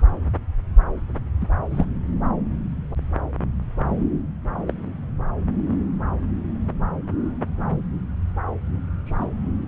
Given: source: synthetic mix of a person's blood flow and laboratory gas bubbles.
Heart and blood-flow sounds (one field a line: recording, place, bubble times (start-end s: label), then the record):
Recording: Doppler ultrasound of blood flow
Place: subclavian vein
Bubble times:
1.41-1.46 s: bubbles
1.71-1.85 s: bubbles
4.67-4.73 s: bubbles
9.07-9.29 s: bubbles
From the record:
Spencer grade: 2 (many but less than half of the cardiac periods contain bubble signals, singularly or in groups)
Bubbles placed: anywhere in the cardiac cycle